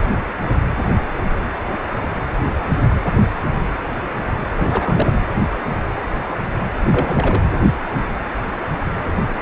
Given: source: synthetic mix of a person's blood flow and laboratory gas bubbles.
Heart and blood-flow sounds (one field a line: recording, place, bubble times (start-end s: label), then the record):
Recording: Doppler ultrasound of blood flow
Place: precordium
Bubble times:
4.57-5.20 s: bubbles
6.85-7.44 s: bubbles
From the record:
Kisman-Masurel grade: 222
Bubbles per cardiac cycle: several, 3 to 8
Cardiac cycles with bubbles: 10 to 50%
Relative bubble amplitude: moderate (0.250 to 0.450)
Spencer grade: 2 (many but less than half of the cardiac periods contain bubble signals, singularly or in groups)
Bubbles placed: anywhere in the cardiac cycle